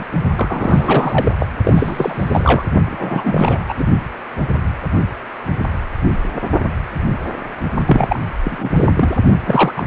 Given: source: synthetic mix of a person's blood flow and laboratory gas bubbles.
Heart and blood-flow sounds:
Doppler ultrasound of blood flow; precordium
0.00-0.04 s: bubbles
0.36-1.46 s: bubbles
1.64-2.62 s: bubbles
2.86-3.86 s: bubbles
7.87-8.20 s: bubbles
8.44-8.70 s: bubbles
8.75-8.87 s: bubbles
8.96-9.16 s: bubbles
9.45-9.87 s: bubbles
From the record:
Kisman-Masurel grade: 333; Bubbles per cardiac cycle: rolling drumbeat, 9 or more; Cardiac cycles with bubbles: 50 to 99%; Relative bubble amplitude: loud (0.450 to 0.775); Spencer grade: 3 (all of the cardiac periods contain showers or single bubble signals, but not dominating or overriding the cardiac motion signals); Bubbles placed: only in the low amplitude regions of the cardiac cycle

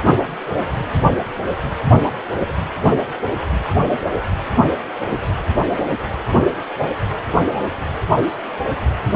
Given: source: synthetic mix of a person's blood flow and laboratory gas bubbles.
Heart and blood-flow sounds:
Doppler ultrasound of blood flow; precordium
no bubbles
From the record:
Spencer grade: 0 (complete lack of bubble signals)

